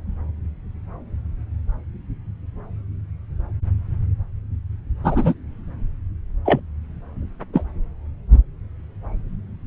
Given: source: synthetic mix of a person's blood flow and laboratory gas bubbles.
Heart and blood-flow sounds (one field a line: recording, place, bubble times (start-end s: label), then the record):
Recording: Doppler ultrasound of blood flow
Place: subclavian vein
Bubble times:
5.04-5.34 s: bubbles
6.45-6.60 s: bubbles
7.53-7.64 s: bubbles
From the record:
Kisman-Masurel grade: 123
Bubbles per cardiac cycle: 1 to 2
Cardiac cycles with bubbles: 10 to 50%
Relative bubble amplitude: loud (0.450 to 0.775)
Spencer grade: 2 (many but less than half of the cardiac periods contain bubble signals, singularly or in groups)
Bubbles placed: anywhere in the cardiac cycle